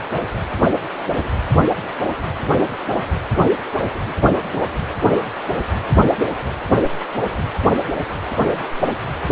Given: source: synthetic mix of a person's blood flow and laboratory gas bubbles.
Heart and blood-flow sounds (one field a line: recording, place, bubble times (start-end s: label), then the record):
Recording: Doppler ultrasound of blood flow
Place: precordium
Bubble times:
1.82-1.88 s: bubbles
From the record:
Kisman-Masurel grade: 111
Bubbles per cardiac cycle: 1 to 2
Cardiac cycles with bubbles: 1 to 10%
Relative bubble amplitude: barely perceptible (0.100 to 0.250)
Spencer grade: 1 (occasional bubble signal discernible with the cardiac motion signal, with majority of cardiac periods free of bubbles)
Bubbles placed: anywhere in the cardiac cycle